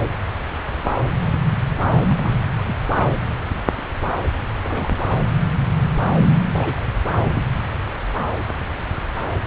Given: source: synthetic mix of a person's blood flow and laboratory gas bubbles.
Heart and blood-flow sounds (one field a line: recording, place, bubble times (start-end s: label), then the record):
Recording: Doppler ultrasound of blood flow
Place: subclavian vein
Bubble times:
2.05-2.33 s: bubbles
2.65-2.75 s: bubbles
2.94-3.12 s: bubbles
4.62-5.05 s: bubbles
5.08-5.22 s: bubbles
6.52-6.84 s: bubbles
7.17-7.44 s: bubbles
From the record:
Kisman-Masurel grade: 221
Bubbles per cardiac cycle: several, 3 to 8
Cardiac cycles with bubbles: 10 to 50%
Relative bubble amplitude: barely perceptible (0.100 to 0.250)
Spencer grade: 2 (many but less than half of the cardiac periods contain bubble signals, singularly or in groups)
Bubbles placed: anywhere in the cardiac cycle